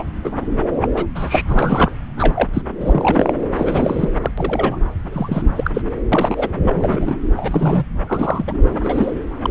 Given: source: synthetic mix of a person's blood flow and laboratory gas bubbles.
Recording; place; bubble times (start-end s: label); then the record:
Doppler ultrasound of blood flow; subclavian vein
0.00-0.05 s: bubbles
0.23-0.32 s: bubbles
0.76-0.88 s: bubbles
0.93-1.06 s: bubbles
1.15-1.42 s: bubbles
1.46-1.92 s: bubbles
2.17-2.50 s: bubbles
2.53-2.61 s: bubbles
2.81-3.33 s: bubbles
3.55-4.10 s: bubbles
4.22-4.31 s: bubbles
4.38-4.78 s: bubbles
5.12-5.42 s: bubbles
5.55-5.71 s: bubbles
5.74-5.81 s: bubbles
6.12-6.48 s: bubbles
6.62-7.16 s: bubbles
7.36-7.85 s: bubbles
8.06-8.45 s: bubbles
8.48-8.54 s: bubbles
8.84-9.12 s: bubbles
9.42-9.50 s: bubbles
From the record:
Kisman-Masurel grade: 242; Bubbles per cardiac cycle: several, 3 to 8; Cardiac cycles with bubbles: 100%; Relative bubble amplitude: moderate (0.250 to 0.450); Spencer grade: 3 (all of the cardiac periods contain showers or single bubble signals, but not dominating or overriding the cardiac motion signals); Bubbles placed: anywhere in the cardiac cycle